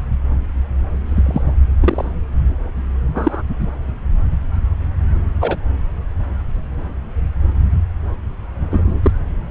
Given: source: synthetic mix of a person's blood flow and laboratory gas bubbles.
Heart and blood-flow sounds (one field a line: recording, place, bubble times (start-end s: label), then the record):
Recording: Doppler ultrasound of blood flow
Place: subclavian vein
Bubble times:
1.05-1.52 s: bubbles
1.82-2.12 s: bubbles
3.15-3.43 s: bubbles
5.40-5.57 s: bubbles
8.71-9.01 s: bubbles
9.04-9.11 s: bubbles
From the record:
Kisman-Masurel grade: 123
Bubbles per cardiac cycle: 1 to 2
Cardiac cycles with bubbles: 10 to 50%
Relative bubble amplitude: loud (0.450 to 0.775)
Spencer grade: 2 (many but less than half of the cardiac periods contain bubble signals, singularly or in groups)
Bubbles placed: anywhere in the cardiac cycle